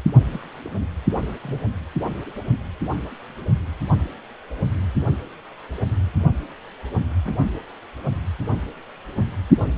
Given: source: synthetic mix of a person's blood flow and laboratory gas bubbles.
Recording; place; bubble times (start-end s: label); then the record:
Doppler ultrasound of blood flow; precordium
0.26-0.40 s: bubbles
0.64-0.72 s: bubbles
1.44-1.59 s: bubbles
7.25-7.34 s: bubbles
From the record:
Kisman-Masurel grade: 121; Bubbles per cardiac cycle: 1 to 2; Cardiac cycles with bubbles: 10 to 50%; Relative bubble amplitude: barely perceptible (0.100 to 0.250); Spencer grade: 2 (many but less than half of the cardiac periods contain bubble signals, singularly or in groups); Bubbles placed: anywhere in the cardiac cycle